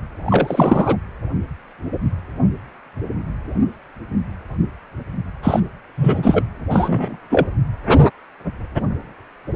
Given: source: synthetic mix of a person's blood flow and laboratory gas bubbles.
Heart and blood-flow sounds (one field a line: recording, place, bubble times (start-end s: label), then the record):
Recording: Doppler ultrasound of blood flow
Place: precordium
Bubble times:
0.26-0.97 s: bubbles
5.42-5.60 s: bubbles
5.97-6.43 s: bubbles
6.70-7.17 s: bubbles
7.30-7.47 s: bubbles
From the record:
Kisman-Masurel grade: 223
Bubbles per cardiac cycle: several, 3 to 8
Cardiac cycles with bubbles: 10 to 50%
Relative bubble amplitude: loud (0.450 to 0.775)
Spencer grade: 2 (many but less than half of the cardiac periods contain bubble signals, singularly or in groups)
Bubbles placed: anywhere in the cardiac cycle